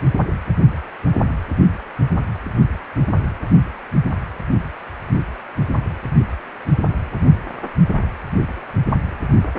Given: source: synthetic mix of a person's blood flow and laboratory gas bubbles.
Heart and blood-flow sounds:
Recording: Doppler ultrasound of blood flow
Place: precordium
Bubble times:
no bubbles
From the record:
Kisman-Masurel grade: 000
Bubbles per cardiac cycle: 0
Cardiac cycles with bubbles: 0%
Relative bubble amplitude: no bubbles discernible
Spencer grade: 0 (complete lack of bubble signals)

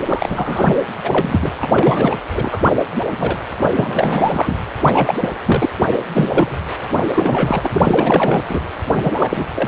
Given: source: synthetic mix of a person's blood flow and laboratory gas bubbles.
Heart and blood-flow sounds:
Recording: Doppler ultrasound of blood flow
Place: precordium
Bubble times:
0.05-0.77 s: bubbles
1.03-1.50 s: bubbles
1.55-1.69 s: bubbles
1.72-2.16 s: bubbles
2.35-2.62 s: bubbles
2.65-2.72 s: bubbles
2.96-3.03 s: bubbles
3.11-3.37 s: bubbles
3.59-3.73 s: bubbles
3.76-4.55 s: bubbles
4.83-5.15 s: bubbles
5.21-5.29 s: bubbles
5.46-5.69 s: bubbles
5.85-5.98 s: bubbles
6.13-6.58 s: bubbles
6.94-7.06 s: bubbles
7.16-7.80 s: bubbles
7.84-8.41 s: bubbles
8.49-8.60 s: bubbles
8.92-9.13 s: bubbles
9.17-9.44 s: bubbles
9.55-9.68 s: bubbles
From the record:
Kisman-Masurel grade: 343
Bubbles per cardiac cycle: rolling drumbeat, 9 or more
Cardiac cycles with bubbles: 100%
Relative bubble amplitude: loud (0.450 to 0.775)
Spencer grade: 3 (all of the cardiac periods contain showers or single bubble signals, but not dominating or overriding the cardiac motion signals)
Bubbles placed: anywhere in the cardiac cycle

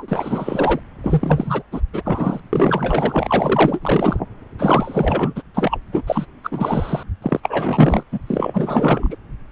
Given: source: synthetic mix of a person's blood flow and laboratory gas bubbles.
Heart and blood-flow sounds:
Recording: Doppler ultrasound of blood flow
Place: subclavian vein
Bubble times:
0.00-0.80 s: bubbles
1.03-1.62 s: bubbles
1.71-1.81 s: bubbles
1.93-2.40 s: bubbles
2.52-4.20 s: bubbles
4.58-5.43 s: bubbles
5.54-5.79 s: bubbles
5.92-6.02 s: bubbles
6.07-6.26 s: bubbles
6.43-7.03 s: bubbles
7.22-8.03 s: bubbles
8.12-8.19 s: bubbles
8.26-9.17 s: bubbles
From the record:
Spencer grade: 4 (maximum detectable bubble signal sounding continuously throughout systole and diastole of every cardiac period, and overriding the amplitude of the normal cardiac signals)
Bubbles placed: anywhere in the cardiac cycle

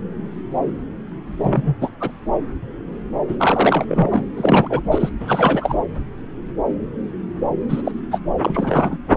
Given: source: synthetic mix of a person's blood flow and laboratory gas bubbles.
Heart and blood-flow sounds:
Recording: Doppler ultrasound of blood flow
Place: subclavian vein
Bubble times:
1.38-1.75 s: bubbles
1.81-1.90 s: bubbles
2.00-2.11 s: bubbles
3.28-3.36 s: bubbles
3.39-4.23 s: bubbles
4.37-4.81 s: bubbles
4.91-5.09 s: bubbles
5.20-5.78 s: bubbles
7.68-7.92 s: bubbles
8.11-8.21 s: bubbles
8.42-8.97 s: bubbles
9.09-9.17 s: bubbles
From the record:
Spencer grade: 3 (all of the cardiac periods contain showers or single bubble signals, but not dominating or overriding the cardiac motion signals)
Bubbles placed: anywhere in the cardiac cycle

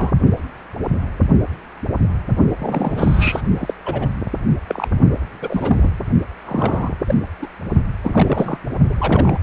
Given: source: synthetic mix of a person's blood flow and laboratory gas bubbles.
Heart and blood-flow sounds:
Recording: Doppler ultrasound of blood flow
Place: precordium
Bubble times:
0.00-0.12 s: bubbles
2.58-3.42 s: bubbles
3.60-3.74 s: bubbles
3.85-4.09 s: bubbles
4.67-4.88 s: bubbles
5.42-5.90 s: bubbles
6.46-6.95 s: bubbles
7.07-7.15 s: bubbles
7.42-7.47 s: bubbles
8.03-8.57 s: bubbles
8.89-8.94 s: bubbles
8.98-9.38 s: bubbles
From the record:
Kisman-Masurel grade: 232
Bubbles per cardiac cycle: several, 3 to 8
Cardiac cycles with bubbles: 50 to 99%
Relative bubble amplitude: moderate (0.250 to 0.450)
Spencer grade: 3 (all of the cardiac periods contain showers or single bubble signals, but not dominating or overriding the cardiac motion signals)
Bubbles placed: only in the low amplitude regions of the cardiac cycle

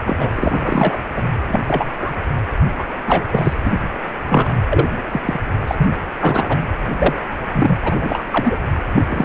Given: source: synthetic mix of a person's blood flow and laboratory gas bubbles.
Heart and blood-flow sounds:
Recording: Doppler ultrasound of blood flow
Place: precordium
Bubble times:
0.05-0.30 s: bubbles
0.35-1.00 s: bubbles
1.16-1.23 s: bubbles
1.48-1.60 s: bubbles
1.67-1.95 s: bubbles
1.99-2.12 s: bubbles
2.79-2.84 s: bubbles
3.06-3.25 s: bubbles
3.31-3.54 s: bubbles
3.65-3.72 s: bubbles
4.28-4.56 s: bubbles
4.70-4.87 s: bubbles
5.11-5.21 s: bubbles
5.25-5.40 s: bubbles
5.67-5.75 s: bubbles
5.77-5.88 s: bubbles
6.19-6.57 s: bubbles
6.98-7.18 s: bubbles
7.53-7.75 s: bubbles
7.82-7.97 s: bubbles
8.00-8.25 s: bubbles
8.31-8.55 s: bubbles
8.95-9.25 s: bubbles
From the record:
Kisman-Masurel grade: 243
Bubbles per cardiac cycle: several, 3 to 8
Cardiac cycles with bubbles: 100%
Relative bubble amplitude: loud (0.450 to 0.775)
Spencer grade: 3 (all of the cardiac periods contain showers or single bubble signals, but not dominating or overriding the cardiac motion signals)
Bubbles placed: anywhere in the cardiac cycle

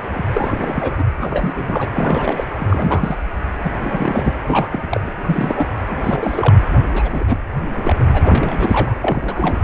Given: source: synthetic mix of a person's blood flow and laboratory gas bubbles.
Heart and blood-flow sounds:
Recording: Doppler ultrasound of blood flow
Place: precordium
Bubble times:
0.09-0.24 s: bubbles
0.31-0.95 s: bubbles
0.98-1.03 s: bubbles
1.17-1.90 s: bubbles
1.95-2.44 s: bubbles
2.60-3.17 s: bubbles
3.62-3.72 s: bubbles
3.80-4.33 s: bubbles
4.47-4.88 s: bubbles
4.90-5.00 s: bubbles
5.03-5.12 s: bubbles
5.24-5.69 s: bubbles
5.89-5.96 s: bubbles
6.04-6.55 s: bubbles
6.93-7.23 s: bubbles
7.27-7.37 s: bubbles
7.71-8.04 s: bubbles
8.12-9.61 s: bubbles
From the record:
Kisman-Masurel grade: 332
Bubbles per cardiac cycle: rolling drumbeat, 9 or more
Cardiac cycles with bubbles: 50 to 99%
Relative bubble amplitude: moderate (0.250 to 0.450)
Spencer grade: 3 (all of the cardiac periods contain showers or single bubble signals, but not dominating or overriding the cardiac motion signals)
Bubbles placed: anywhere in the cardiac cycle

